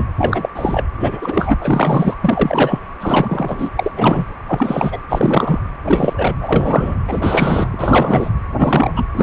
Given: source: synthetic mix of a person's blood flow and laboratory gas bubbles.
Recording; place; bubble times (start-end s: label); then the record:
Doppler ultrasound of blood flow; precordium
0.00-0.05 s: bubbles
0.17-0.49 s: bubbles
0.55-0.84 s: bubbles
1.00-1.57 s: bubbles
1.60-2.15 s: bubbles
2.21-2.79 s: bubbles
3.00-3.70 s: bubbles
3.77-3.92 s: bubbles
3.96-4.24 s: bubbles
4.48-4.98 s: bubbles
5.08-5.61 s: bubbles
5.86-6.13 s: bubbles
6.17-6.33 s: bubbles
6.41-6.95 s: bubbles
7.08-8.29 s: bubbles
8.58-8.91 s: bubbles
8.96-9.08 s: bubbles
9.14-9.23 s: bubbles
From the record:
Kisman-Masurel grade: 343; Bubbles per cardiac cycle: rolling drumbeat, 9 or more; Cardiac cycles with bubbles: 100%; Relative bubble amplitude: loud (0.450 to 0.775); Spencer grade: 3 (all of the cardiac periods contain showers or single bubble signals, but not dominating or overriding the cardiac motion signals); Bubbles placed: anywhere in the cardiac cycle